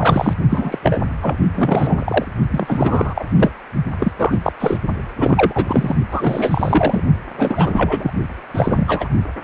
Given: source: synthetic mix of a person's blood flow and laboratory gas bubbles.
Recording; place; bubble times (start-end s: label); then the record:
Doppler ultrasound of blood flow; precordium
0.00-0.34 s: bubbles
0.50-0.79 s: bubbles
0.82-0.98 s: bubbles
1.21-1.36 s: bubbles
1.54-2.26 s: bubbles
2.50-3.24 s: bubbles
3.37-3.52 s: bubbles
3.99-4.12 s: bubbles
4.17-4.39 s: bubbles
4.43-4.53 s: bubbles
4.59-4.79 s: bubbles
5.18-5.96 s: bubbles
6.11-7.03 s: bubbles
7.37-8.11 s: bubbles
8.54-9.09 s: bubbles
9.41-9.44 s: bubbles
From the record:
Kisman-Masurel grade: 343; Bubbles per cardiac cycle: rolling drumbeat, 9 or more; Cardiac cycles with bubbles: 100%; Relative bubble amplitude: loud (0.450 to 0.775); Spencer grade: 3 (all of the cardiac periods contain showers or single bubble signals, but not dominating or overriding the cardiac motion signals); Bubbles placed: only in the low amplitude regions of the cardiac cycle